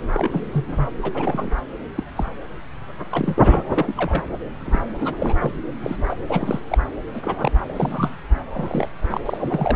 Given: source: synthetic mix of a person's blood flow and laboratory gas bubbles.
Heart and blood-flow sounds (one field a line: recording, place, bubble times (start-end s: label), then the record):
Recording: Doppler ultrasound of blood flow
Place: subclavian vein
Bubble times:
0.12-0.87 s: bubbles
1.02-1.50 s: bubbles
1.96-2.04 s: bubbles
2.16-2.25 s: bubbles
3.10-3.63 s: bubbles
3.74-3.94 s: bubbles
3.97-4.22 s: bubbles
4.64-4.80 s: bubbles
4.88-5.15 s: bubbles
5.18-5.52 s: bubbles
5.83-6.14 s: bubbles
6.27-6.60 s: bubbles
6.68-6.78 s: bubbles
7.14-7.51 s: bubbles
7.68-8.16 s: bubbles
8.54-8.88 s: bubbles
9.10-9.21 s: bubbles
9.25-9.76 s: bubbles
From the record:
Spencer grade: 3 (all of the cardiac periods contain showers or single bubble signals, but not dominating or overriding the cardiac motion signals)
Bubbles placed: anywhere in the cardiac cycle